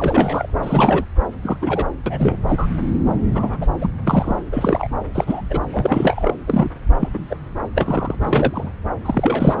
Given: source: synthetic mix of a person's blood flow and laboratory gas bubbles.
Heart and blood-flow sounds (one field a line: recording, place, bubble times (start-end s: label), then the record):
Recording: Doppler ultrasound of blood flow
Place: subclavian vein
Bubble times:
0.00-0.47 s: bubbles
0.62-1.04 s: bubbles
1.42-1.56 s: bubbles
1.61-1.84 s: bubbles
2.06-2.38 s: bubbles
2.48-2.66 s: bubbles
3.35-3.58 s: bubbles
3.61-3.67 s: bubbles
3.81-3.90 s: bubbles
4.06-4.36 s: bubbles
4.52-4.88 s: bubbles
5.14-5.42 s: bubbles
5.50-5.59 s: bubbles
5.72-6.30 s: bubbles
6.47-6.69 s: bubbles
6.98-7.09 s: bubbles
7.13-7.19 s: bubbles
7.30-7.35 s: bubbles
7.75-8.15 s: bubbles
8.21-8.70 s: bubbles
9.04-9.60 s: bubbles
From the record:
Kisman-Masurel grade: 242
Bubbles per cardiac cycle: several, 3 to 8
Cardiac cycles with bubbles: 100%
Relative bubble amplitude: moderate (0.250 to 0.450)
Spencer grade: 3 (all of the cardiac periods contain showers or single bubble signals, but not dominating or overriding the cardiac motion signals)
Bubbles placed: anywhere in the cardiac cycle